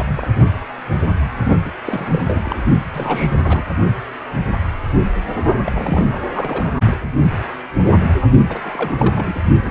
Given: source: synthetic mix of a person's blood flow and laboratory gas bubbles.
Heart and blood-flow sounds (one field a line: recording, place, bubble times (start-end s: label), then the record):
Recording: Doppler ultrasound of blood flow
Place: precordium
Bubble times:
0.00-0.04 s: bubbles
0.08-0.28 s: bubbles
1.66-1.72 s: bubbles
1.85-2.21 s: bubbles
2.24-2.59 s: bubbles
2.92-3.65 s: bubbles
5.66-6.23 s: bubbles
6.32-6.74 s: bubbles
8.49-9.41 s: bubbles
9.65-9.71 s: bubbles
From the record:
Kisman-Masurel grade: 332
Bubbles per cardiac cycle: rolling drumbeat, 9 or more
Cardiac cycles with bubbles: 50 to 99%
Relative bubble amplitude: moderate (0.250 to 0.450)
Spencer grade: 3 (all of the cardiac periods contain showers or single bubble signals, but not dominating or overriding the cardiac motion signals)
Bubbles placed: only in the low amplitude regions of the cardiac cycle